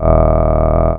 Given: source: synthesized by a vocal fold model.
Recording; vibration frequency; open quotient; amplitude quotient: sustained vowel; 40 Hz; 0.5; 1.2